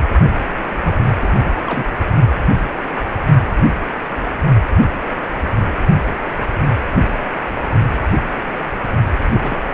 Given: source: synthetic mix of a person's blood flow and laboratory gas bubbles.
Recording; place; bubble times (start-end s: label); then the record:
Doppler ultrasound of blood flow; precordium
0.83-0.97 s: bubbles
1.20-1.33 s: bubbles
1.44-1.51 s: bubbles
1.63-1.86 s: bubbles
9.19-9.24 s: bubbles
9.35-9.56 s: bubbles
9.65-9.74 s: bubbles
From the record:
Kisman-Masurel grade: 221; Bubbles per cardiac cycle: several, 3 to 8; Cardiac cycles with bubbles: 10 to 50%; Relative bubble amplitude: barely perceptible (0.100 to 0.250); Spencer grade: 2 (many but less than half of the cardiac periods contain bubble signals, singularly or in groups); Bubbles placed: only in the low amplitude regions of the cardiac cycle